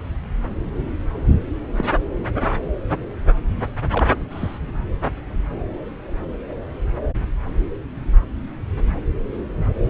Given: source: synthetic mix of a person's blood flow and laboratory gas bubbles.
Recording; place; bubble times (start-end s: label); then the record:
Doppler ultrasound of blood flow; subclavian vein
1.76-1.84 s: bubbles
2.41-2.48 s: bubbles
3.91-4.06 s: bubbles
4.30-4.59 s: bubbles
From the record:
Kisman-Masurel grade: 121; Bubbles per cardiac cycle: 1 to 2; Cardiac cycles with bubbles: 10 to 50%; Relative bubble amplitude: barely perceptible (0.100 to 0.250); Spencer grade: 2 (many but less than half of the cardiac periods contain bubble signals, singularly or in groups); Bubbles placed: anywhere in the cardiac cycle